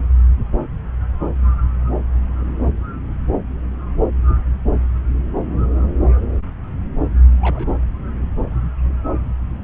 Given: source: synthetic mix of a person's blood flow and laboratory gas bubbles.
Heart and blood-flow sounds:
Doppler ultrasound of blood flow; subclavian vein
7.41-7.68 s: bubbles
From the record:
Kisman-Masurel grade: 111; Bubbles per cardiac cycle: 1 to 2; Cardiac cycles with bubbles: 1 to 10%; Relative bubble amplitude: barely perceptible (0.100 to 0.250); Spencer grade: 1 (occasional bubble signal discernible with the cardiac motion signal, with majority of cardiac periods free of bubbles); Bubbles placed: anywhere in the cardiac cycle

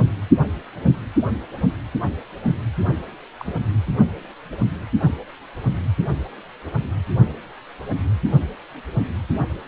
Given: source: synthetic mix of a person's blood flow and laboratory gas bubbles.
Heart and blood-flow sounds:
Doppler ultrasound of blood flow; precordium
3.38-3.54 s: bubbles
From the record:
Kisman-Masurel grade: 121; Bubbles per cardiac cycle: 1 to 2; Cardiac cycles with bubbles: 10 to 50%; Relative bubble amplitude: barely perceptible (0.100 to 0.250); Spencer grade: 2 (many but less than half of the cardiac periods contain bubble signals, singularly or in groups); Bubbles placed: anywhere in the cardiac cycle

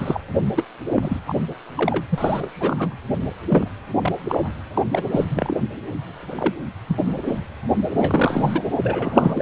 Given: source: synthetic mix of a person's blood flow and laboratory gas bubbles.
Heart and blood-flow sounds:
Doppler ultrasound of blood flow; precordium
0.00-0.20 s: bubbles
0.54-0.63 s: bubbles
0.93-1.20 s: bubbles
1.27-1.34 s: bubbles
1.77-2.05 s: bubbles
2.10-2.49 s: bubbles
2.52-2.97 s: bubbles
3.48-3.68 s: bubbles
4.01-4.12 s: bubbles
4.29-4.48 s: bubbles
4.73-4.83 s: bubbles
4.91-5.03 s: bubbles
5.11-5.25 s: bubbles
5.29-5.55 s: bubbles
6.31-6.54 s: bubbles
6.88-6.97 s: bubbles
7.27-7.39 s: bubbles
7.92-8.62 s: bubbles
8.83-9.42 s: bubbles
From the record:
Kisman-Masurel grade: 242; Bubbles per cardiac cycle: several, 3 to 8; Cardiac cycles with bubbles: 100%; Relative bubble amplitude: moderate (0.250 to 0.450); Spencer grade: 3 (all of the cardiac periods contain showers or single bubble signals, but not dominating or overriding the cardiac motion signals); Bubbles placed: anywhere in the cardiac cycle

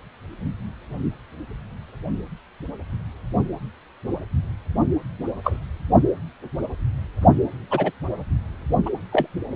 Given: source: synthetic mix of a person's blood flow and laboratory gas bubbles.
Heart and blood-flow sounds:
Doppler ultrasound of blood flow; precordium
5.43-5.59 s: bubbles
7.71-7.92 s: bubbles
8.86-8.90 s: bubbles
9.12-9.28 s: bubbles
From the record:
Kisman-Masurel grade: 123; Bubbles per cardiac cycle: 1 to 2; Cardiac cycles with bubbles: 10 to 50%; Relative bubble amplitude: loud (0.450 to 0.775); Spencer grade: 2 (many but less than half of the cardiac periods contain bubble signals, singularly or in groups); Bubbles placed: only in the low amplitude regions of the cardiac cycle

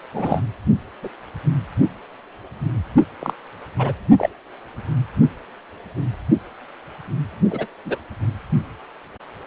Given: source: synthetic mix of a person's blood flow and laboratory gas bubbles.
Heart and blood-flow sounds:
Doppler ultrasound of blood flow; precordium
0.13-0.42 s: bubbles
1.02-1.09 s: bubbles
3.19-3.33 s: bubbles
3.78-3.93 s: bubbles
4.18-4.29 s: bubbles
7.50-7.66 s: bubbles
7.85-7.98 s: bubbles
From the record:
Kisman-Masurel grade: 122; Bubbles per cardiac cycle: 1 to 2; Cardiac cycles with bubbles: 10 to 50%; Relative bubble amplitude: moderate (0.250 to 0.450); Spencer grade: 2 (many but less than half of the cardiac periods contain bubble signals, singularly or in groups); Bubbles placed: anywhere in the cardiac cycle

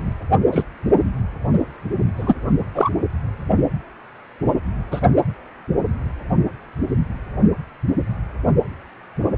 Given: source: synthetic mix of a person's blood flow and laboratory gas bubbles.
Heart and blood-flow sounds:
Doppler ultrasound of blood flow; precordium
0.51-0.63 s: bubbles
2.17-2.35 s: bubbles
2.75-2.90 s: bubbles
4.91-5.00 s: bubbles
From the record:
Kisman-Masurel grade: 123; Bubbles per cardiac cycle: 1 to 2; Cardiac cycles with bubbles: 10 to 50%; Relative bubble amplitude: loud (0.450 to 0.775); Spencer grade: 2 (many but less than half of the cardiac periods contain bubble signals, singularly or in groups); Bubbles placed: only in the low amplitude regions of the cardiac cycle

